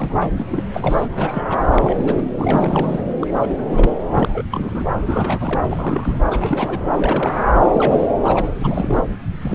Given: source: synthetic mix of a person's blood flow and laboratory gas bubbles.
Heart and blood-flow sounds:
Doppler ultrasound of blood flow; subclavian vein
0.00-0.43 s: bubbles
0.46-0.64 s: bubbles
0.74-1.07 s: bubbles
1.16-1.44 s: bubbles
1.49-1.61 s: bubbles
1.73-2.31 s: bubbles
2.38-3.01 s: bubbles
3.21-3.95 s: bubbles
4.12-4.43 s: bubbles
4.51-4.86 s: bubbles
4.92-5.61 s: bubbles
5.65-5.68 s: bubbles
5.71-6.19 s: bubbles
6.31-6.79 s: bubbles
6.95-7.44 s: bubbles
7.71-8.06 s: bubbles
8.18-8.47 s: bubbles
8.59-9.04 s: bubbles
9.42-9.55 s: bubbles
From the record:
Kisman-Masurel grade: 342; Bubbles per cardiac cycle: rolling drumbeat, 9 or more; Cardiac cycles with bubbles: 100%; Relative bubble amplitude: moderate (0.250 to 0.450); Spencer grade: 3 (all of the cardiac periods contain showers or single bubble signals, but not dominating or overriding the cardiac motion signals); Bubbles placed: anywhere in the cardiac cycle

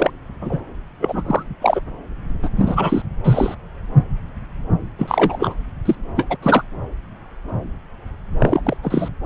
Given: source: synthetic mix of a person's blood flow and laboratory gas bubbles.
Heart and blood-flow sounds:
Doppler ultrasound of blood flow; subclavian vein
0.00-0.11 s: bubbles
0.41-0.60 s: bubbles
1.00-1.44 s: bubbles
1.61-1.81 s: bubbles
2.42-2.49 s: bubbles
2.56-3.02 s: bubbles
3.23-3.54 s: bubbles
4.99-5.54 s: bubbles
5.85-5.95 s: bubbles
6.16-6.37 s: bubbles
6.42-6.63 s: bubbles
8.40-8.61 s: bubbles
8.64-8.77 s: bubbles
8.83-9.09 s: bubbles
From the record:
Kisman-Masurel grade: 233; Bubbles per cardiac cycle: several, 3 to 8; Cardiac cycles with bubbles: 50 to 99%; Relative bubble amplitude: loud (0.450 to 0.775); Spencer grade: 3 (all of the cardiac periods contain showers or single bubble signals, but not dominating or overriding the cardiac motion signals); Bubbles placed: anywhere in the cardiac cycle

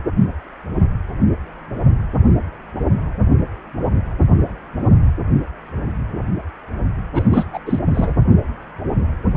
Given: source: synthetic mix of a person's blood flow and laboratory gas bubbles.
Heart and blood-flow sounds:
Doppler ultrasound of blood flow; precordium
7.14-7.45 s: bubbles
7.52-7.59 s: bubbles
7.66-7.79 s: bubbles
7.94-8.13 s: bubbles
From the record:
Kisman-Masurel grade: 213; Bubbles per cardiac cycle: several, 3 to 8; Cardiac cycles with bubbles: 1 to 10%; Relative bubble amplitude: loud (0.450 to 0.775); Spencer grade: 1 (occasional bubble signal discernible with the cardiac motion signal, with majority of cardiac periods free of bubbles); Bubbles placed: anywhere in the cardiac cycle

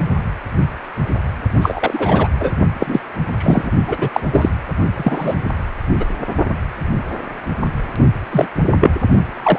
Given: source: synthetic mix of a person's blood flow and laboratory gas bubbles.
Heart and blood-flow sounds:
Doppler ultrasound of blood flow; precordium
1.61-2.29 s: bubbles
2.39-2.53 s: bubbles
2.79-3.00 s: bubbles
3.38-3.71 s: bubbles
3.88-4.09 s: bubbles
4.12-4.21 s: bubbles
4.32-4.50 s: bubbles
4.96-5.34 s: bubbles
6.00-6.04 s: bubbles
8.31-8.47 s: bubbles
8.80-8.90 s: bubbles
9.32-9.59 s: bubbles
From the record:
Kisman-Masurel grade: 233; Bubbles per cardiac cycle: several, 3 to 8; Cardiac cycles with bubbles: 50 to 99%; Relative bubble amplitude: loud (0.450 to 0.775); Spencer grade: 3 (all of the cardiac periods contain showers or single bubble signals, but not dominating or overriding the cardiac motion signals); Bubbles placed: only in the low amplitude regions of the cardiac cycle

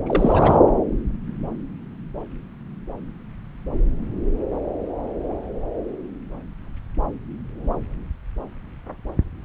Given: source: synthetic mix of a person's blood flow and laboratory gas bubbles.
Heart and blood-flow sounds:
Doppler ultrasound of blood flow; subclavian vein
0.06-0.59 s: bubbles
From the record:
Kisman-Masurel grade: 212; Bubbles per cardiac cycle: several, 3 to 8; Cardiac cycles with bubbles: 1 to 10%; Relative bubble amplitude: moderate (0.250 to 0.450); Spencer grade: 1 (occasional bubble signal discernible with the cardiac motion signal, with majority of cardiac periods free of bubbles); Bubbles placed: anywhere in the cardiac cycle

